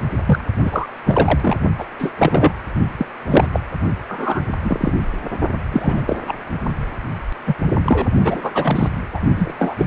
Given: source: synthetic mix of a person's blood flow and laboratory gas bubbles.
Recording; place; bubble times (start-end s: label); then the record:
Doppler ultrasound of blood flow; precordium
0.26-0.42 s: bubbles
0.65-0.88 s: bubbles
1.05-1.56 s: bubbles
1.78-1.86 s: bubbles
1.98-2.12 s: bubbles
2.19-2.52 s: bubbles
2.98-3.06 s: bubbles
3.29-3.47 s: bubbles
3.52-3.60 s: bubbles
4.08-4.45 s: bubbles
4.63-4.93 s: bubbles
5.71-6.02 s: bubbles
6.06-6.17 s: bubbles
6.28-6.33 s: bubbles
7.46-7.54 s: bubbles
7.86-8.06 s: bubbles
8.24-8.88 s: bubbles
9.14-9.21 s: bubbles
9.36-9.54 s: bubbles
9.58-9.74 s: bubbles
9.77-9.86 s: bubbles
From the record:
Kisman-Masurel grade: 233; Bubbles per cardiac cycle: several, 3 to 8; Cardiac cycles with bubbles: 50 to 99%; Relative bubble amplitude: loud (0.450 to 0.775); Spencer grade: 3 (all of the cardiac periods contain showers or single bubble signals, but not dominating or overriding the cardiac motion signals); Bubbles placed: only in the low amplitude regions of the cardiac cycle